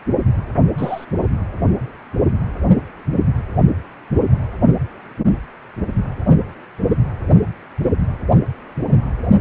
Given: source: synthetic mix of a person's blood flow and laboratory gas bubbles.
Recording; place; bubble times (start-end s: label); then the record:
Doppler ultrasound of blood flow; precordium
0.77-1.06 s: bubbles
From the record:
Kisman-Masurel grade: 113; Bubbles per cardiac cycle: 1 to 2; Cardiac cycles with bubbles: 1 to 10%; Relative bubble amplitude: loud (0.450 to 0.775); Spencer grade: 1 (occasional bubble signal discernible with the cardiac motion signal, with majority of cardiac periods free of bubbles); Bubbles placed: anywhere in the cardiac cycle